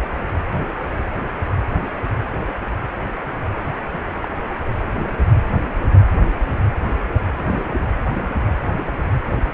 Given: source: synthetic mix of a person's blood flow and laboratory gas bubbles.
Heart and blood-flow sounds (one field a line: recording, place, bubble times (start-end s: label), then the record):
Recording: Doppler ultrasound of blood flow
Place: precordium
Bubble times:
0.27-0.32 s: bubbles
3.92-3.99 s: bubbles
4.21-4.28 s: bubbles
7.37-7.67 s: bubbles
8.70-8.93 s: bubbles
From the record:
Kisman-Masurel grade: 121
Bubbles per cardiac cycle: 1 to 2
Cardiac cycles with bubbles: 10 to 50%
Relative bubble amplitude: barely perceptible (0.100 to 0.250)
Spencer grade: 2 (many but less than half of the cardiac periods contain bubble signals, singularly or in groups)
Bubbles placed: anywhere in the cardiac cycle